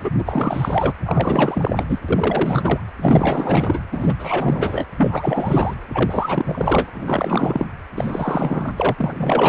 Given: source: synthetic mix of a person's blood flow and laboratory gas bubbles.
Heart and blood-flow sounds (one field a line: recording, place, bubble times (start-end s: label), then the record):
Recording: Doppler ultrasound of blood flow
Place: precordium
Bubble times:
0.03-0.11 s: bubbles
0.17-0.93 s: bubbles
1.05-1.84 s: bubbles
1.88-1.99 s: bubbles
2.09-2.80 s: bubbles
3.01-3.80 s: bubbles
3.92-4.15 s: bubbles
4.19-4.85 s: bubbles
4.92-5.74 s: bubbles
5.94-6.90 s: bubbles
6.94-7.66 s: bubbles
7.95-8.72 s: bubbles
8.77-8.95 s: bubbles
8.97-9.49 s: bubbles
From the record:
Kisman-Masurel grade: 444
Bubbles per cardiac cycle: continuous sound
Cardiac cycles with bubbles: 100%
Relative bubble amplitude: maximal (0.775 to 0.999)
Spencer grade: 4 (maximum detectable bubble signal sounding continuously throughout systole and diastole of every cardiac period, and overriding the amplitude of the normal cardiac signals)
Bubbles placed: anywhere in the cardiac cycle